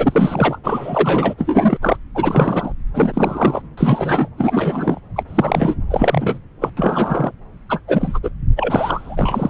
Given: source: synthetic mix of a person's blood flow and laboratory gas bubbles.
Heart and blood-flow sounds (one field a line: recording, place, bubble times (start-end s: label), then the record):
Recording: Doppler ultrasound of blood flow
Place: subclavian vein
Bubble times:
0.00-0.58 s: bubbles
0.64-1.34 s: bubbles
1.38-1.78 s: bubbles
1.82-1.97 s: bubbles
2.14-2.72 s: bubbles
2.94-3.62 s: bubbles
3.77-4.28 s: bubbles
4.37-4.99 s: bubbles
5.16-5.23 s: bubbles
5.27-5.75 s: bubbles
5.90-6.39 s: bubbles
6.61-6.70 s: bubbles
6.77-7.31 s: bubbles
7.69-7.79 s: bubbles
7.87-8.19 s: bubbles
8.23-8.29 s: bubbles
8.57-9.49 s: bubbles
From the record:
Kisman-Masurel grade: 343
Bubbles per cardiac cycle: rolling drumbeat, 9 or more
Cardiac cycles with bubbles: 100%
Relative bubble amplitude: loud (0.450 to 0.775)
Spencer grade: 3 (all of the cardiac periods contain showers or single bubble signals, but not dominating or overriding the cardiac motion signals)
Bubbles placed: anywhere in the cardiac cycle